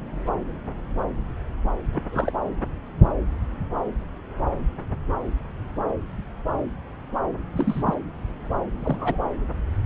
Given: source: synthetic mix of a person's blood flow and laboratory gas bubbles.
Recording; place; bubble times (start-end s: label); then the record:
Doppler ultrasound of blood flow; subclavian vein
1.93-2.03 s: bubbles
2.12-2.32 s: bubbles
7.55-7.83 s: bubbles
7.86-7.94 s: bubbles
8.79-9.19 s: bubbles
From the record:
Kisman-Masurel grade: 222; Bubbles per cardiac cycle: several, 3 to 8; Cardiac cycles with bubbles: 10 to 50%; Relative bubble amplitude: moderate (0.250 to 0.450); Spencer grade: 2 (many but less than half of the cardiac periods contain bubble signals, singularly or in groups); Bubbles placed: anywhere in the cardiac cycle